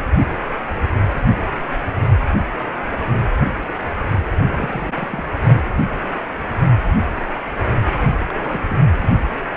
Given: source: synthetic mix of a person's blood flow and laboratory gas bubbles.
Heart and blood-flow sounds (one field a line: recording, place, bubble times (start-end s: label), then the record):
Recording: Doppler ultrasound of blood flow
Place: precordium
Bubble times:
4.46-5.23 s: bubbles
5.43-5.69 s: bubbles
8.28-8.63 s: bubbles
8.70-8.76 s: bubbles
8.98-9.10 s: bubbles
From the record:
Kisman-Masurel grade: 221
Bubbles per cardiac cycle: several, 3 to 8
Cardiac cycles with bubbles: 10 to 50%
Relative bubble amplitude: barely perceptible (0.100 to 0.250)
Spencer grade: 2 (many but less than half of the cardiac periods contain bubble signals, singularly or in groups)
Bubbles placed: anywhere in the cardiac cycle